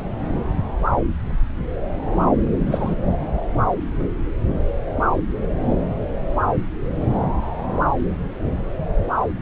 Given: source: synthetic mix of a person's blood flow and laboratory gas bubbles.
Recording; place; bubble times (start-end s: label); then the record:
Doppler ultrasound of blood flow; subclavian vein
2.66-2.95 s: bubbles
From the record:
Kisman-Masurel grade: 112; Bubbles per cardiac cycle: 1 to 2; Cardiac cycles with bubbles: 1 to 10%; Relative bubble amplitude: moderate (0.250 to 0.450); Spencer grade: 1 (occasional bubble signal discernible with the cardiac motion signal, with majority of cardiac periods free of bubbles); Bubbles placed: anywhere in the cardiac cycle